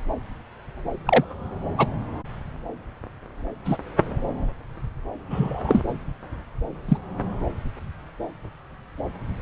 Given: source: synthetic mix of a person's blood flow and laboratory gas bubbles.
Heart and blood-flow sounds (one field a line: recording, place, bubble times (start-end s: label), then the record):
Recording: Doppler ultrasound of blood flow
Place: subclavian vein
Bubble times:
1.06-1.24 s: bubbles
1.78-1.87 s: bubbles
3.65-3.78 s: bubbles
5.30-5.82 s: bubbles
6.88-6.97 s: bubbles
From the record:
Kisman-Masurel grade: 123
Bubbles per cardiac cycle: 1 to 2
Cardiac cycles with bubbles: 10 to 50%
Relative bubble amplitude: loud (0.450 to 0.775)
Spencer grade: 2 (many but less than half of the cardiac periods contain bubble signals, singularly or in groups)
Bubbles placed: anywhere in the cardiac cycle